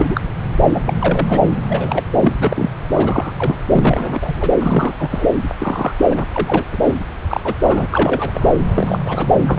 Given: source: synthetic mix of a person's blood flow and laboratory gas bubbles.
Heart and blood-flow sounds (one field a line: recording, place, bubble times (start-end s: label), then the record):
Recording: Doppler ultrasound of blood flow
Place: subclavian vein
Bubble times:
0.00-0.20 s: bubbles
0.73-0.80 s: bubbles
0.85-0.93 s: bubbles
1.00-1.40 s: bubbles
1.68-2.04 s: bubbles
2.19-2.33 s: bubbles
2.40-2.70 s: bubbles
2.93-3.60 s: bubbles
3.71-4.51 s: bubbles
4.58-5.28 s: bubbles
5.58-5.92 s: bubbles
6.10-6.25 s: bubbles
6.32-6.64 s: bubbles
6.72-6.77 s: bubbles
6.83-6.94 s: bubbles
7.27-7.40 s: bubbles
7.43-7.54 s: bubbles
7.62-7.87 s: bubbles
7.91-8.56 s: bubbles
8.74-8.98 s: bubbles
9.04-9.33 s: bubbles
9.43-9.59 s: bubbles
From the record:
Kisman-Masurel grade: 242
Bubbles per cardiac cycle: several, 3 to 8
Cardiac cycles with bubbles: 100%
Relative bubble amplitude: moderate (0.250 to 0.450)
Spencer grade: 3 (all of the cardiac periods contain showers or single bubble signals, but not dominating or overriding the cardiac motion signals)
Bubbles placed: anywhere in the cardiac cycle